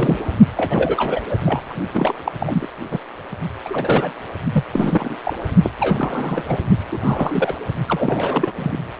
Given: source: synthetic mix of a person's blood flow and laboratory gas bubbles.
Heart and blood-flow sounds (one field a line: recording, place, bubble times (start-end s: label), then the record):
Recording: Doppler ultrasound of blood flow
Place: precordium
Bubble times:
0.00-0.32 s: bubbles
0.56-1.24 s: bubbles
1.30-1.36 s: bubbles
1.41-1.75 s: bubbles
1.94-2.14 s: bubbles
2.24-2.31 s: bubbles
2.40-2.69 s: bubbles
2.91-2.99 s: bubbles
3.65-4.12 s: bubbles
4.52-4.64 s: bubbles
4.73-5.15 s: bubbles
5.25-5.33 s: bubbles
5.63-5.71 s: bubbles
5.79-6.43 s: bubbles
6.47-6.58 s: bubbles
6.92-7.56 s: bubbles
7.89-8.53 s: bubbles
8.55-8.77 s: bubbles
From the record:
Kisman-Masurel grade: 332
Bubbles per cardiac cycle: rolling drumbeat, 9 or more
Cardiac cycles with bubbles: 50 to 99%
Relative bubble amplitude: moderate (0.250 to 0.450)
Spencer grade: 3 (all of the cardiac periods contain showers or single bubble signals, but not dominating or overriding the cardiac motion signals)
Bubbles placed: only in the low amplitude regions of the cardiac cycle